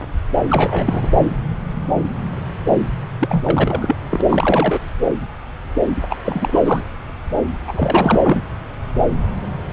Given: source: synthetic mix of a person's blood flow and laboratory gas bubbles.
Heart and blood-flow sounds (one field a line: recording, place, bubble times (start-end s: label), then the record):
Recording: Doppler ultrasound of blood flow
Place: subclavian vein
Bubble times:
0.49-1.08 s: bubbles
3.19-3.96 s: bubbles
4.10-4.21 s: bubbles
4.29-4.81 s: bubbles
6.09-6.17 s: bubbles
6.25-6.86 s: bubbles
7.67-8.42 s: bubbles
From the record:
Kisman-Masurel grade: 333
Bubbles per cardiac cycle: rolling drumbeat, 9 or more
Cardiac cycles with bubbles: 50 to 99%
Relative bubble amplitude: loud (0.450 to 0.775)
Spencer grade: 3 (all of the cardiac periods contain showers or single bubble signals, but not dominating or overriding the cardiac motion signals)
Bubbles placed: anywhere in the cardiac cycle